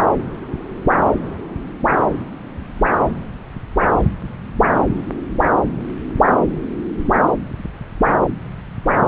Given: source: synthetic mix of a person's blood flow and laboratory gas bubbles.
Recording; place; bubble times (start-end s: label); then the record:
Doppler ultrasound of blood flow; subclavian vein
4.23-4.29 s: bubbles
From the record:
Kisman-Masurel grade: 111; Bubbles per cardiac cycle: 1 to 2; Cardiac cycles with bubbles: 1 to 10%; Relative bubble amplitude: barely perceptible (0.100 to 0.250); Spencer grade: 1 (occasional bubble signal discernible with the cardiac motion signal, with majority of cardiac periods free of bubbles); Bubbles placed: anywhere in the cardiac cycle